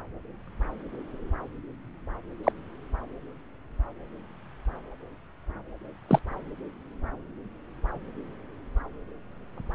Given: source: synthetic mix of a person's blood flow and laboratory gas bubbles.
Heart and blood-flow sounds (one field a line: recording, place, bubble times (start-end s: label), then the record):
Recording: Doppler ultrasound of blood flow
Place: subclavian vein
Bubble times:
2.44-2.52 s: bubbles
6.09-6.19 s: bubbles
From the record:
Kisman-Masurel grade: 122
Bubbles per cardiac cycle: 1 to 2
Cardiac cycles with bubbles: 10 to 50%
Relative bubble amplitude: moderate (0.250 to 0.450)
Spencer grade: 2 (many but less than half of the cardiac periods contain bubble signals, singularly or in groups)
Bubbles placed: anywhere in the cardiac cycle